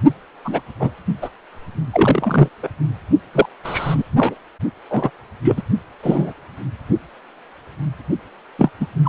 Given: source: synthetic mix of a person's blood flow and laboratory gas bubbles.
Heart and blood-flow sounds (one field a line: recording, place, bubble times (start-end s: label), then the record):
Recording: Doppler ultrasound of blood flow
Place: precordium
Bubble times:
0.44-0.61 s: bubbles
0.80-0.91 s: bubbles
1.22-1.30 s: bubbles
1.93-2.48 s: bubbles
2.62-2.68 s: bubbles
3.33-3.46 s: bubbles
3.64-4.02 s: bubbles
4.17-4.34 s: bubbles
4.89-5.10 s: bubbles
5.44-5.62 s: bubbles
6.03-6.33 s: bubbles
8.59-8.71 s: bubbles
8.80-8.87 s: bubbles
9.03-9.09 s: bubbles
From the record:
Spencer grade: 3 (all of the cardiac periods contain showers or single bubble signals, but not dominating or overriding the cardiac motion signals)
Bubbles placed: only in the low amplitude regions of the cardiac cycle